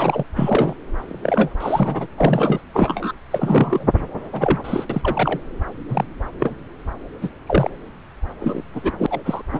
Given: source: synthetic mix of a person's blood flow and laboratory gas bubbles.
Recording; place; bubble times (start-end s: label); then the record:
Doppler ultrasound of blood flow; subclavian vein
0.00-0.23 s: bubbles
0.36-0.75 s: bubbles
1.00-1.50 s: bubbles
1.60-2.07 s: bubbles
2.17-2.60 s: bubbles
2.73-3.12 s: bubbles
3.30-3.92 s: bubbles
4.33-4.85 s: bubbles
4.89-5.40 s: bubbles
5.88-6.05 s: bubbles
6.39-6.55 s: bubbles
7.21-7.29 s: bubbles
7.47-7.71 s: bubbles
8.40-8.62 s: bubbles
8.74-8.92 s: bubbles
8.98-9.07 s: bubbles
9.10-9.21 s: bubbles
9.25-9.43 s: bubbles
9.53-9.60 s: bubbles
From the record:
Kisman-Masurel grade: 242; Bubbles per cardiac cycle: several, 3 to 8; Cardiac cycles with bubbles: 100%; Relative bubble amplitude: moderate (0.250 to 0.450); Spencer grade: 3 (all of the cardiac periods contain showers or single bubble signals, but not dominating or overriding the cardiac motion signals); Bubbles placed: anywhere in the cardiac cycle